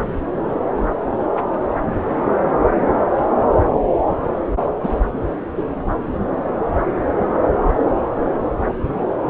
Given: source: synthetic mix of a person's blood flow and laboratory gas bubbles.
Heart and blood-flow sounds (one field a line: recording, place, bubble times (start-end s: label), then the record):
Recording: Doppler ultrasound of blood flow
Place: subclavian vein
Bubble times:
4.83-4.89 s: bubbles
5.58-5.63 s: bubbles
From the record:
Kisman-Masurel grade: 123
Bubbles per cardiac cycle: 1 to 2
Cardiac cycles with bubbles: 10 to 50%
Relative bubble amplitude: loud (0.450 to 0.775)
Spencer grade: 2 (many but less than half of the cardiac periods contain bubble signals, singularly or in groups)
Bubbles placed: anywhere in the cardiac cycle